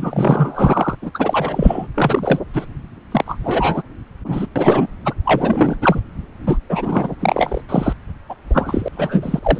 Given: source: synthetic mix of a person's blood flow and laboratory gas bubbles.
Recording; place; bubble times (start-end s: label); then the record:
Doppler ultrasound of blood flow; subclavian vein
0.00-0.95 s: bubbles
1.02-1.11 s: bubbles
1.14-1.87 s: bubbles
1.94-2.40 s: bubbles
2.53-2.66 s: bubbles
3.11-3.37 s: bubbles
3.43-3.82 s: bubbles
4.24-4.46 s: bubbles
4.55-4.87 s: bubbles
5.05-5.13 s: bubbles
5.25-5.77 s: bubbles
5.81-6.01 s: bubbles
6.46-6.57 s: bubbles
6.69-7.15 s: bubbles
7.20-7.62 s: bubbles
7.68-7.93 s: bubbles
8.29-8.35 s: bubbles
8.50-8.89 s: bubbles
8.93-9.40 s: bubbles
9.43-9.60 s: bubbles
From the record:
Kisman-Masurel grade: 343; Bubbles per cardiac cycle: rolling drumbeat, 9 or more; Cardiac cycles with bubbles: 100%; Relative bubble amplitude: loud (0.450 to 0.775); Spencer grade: 3 (all of the cardiac periods contain showers or single bubble signals, but not dominating or overriding the cardiac motion signals); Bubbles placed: anywhere in the cardiac cycle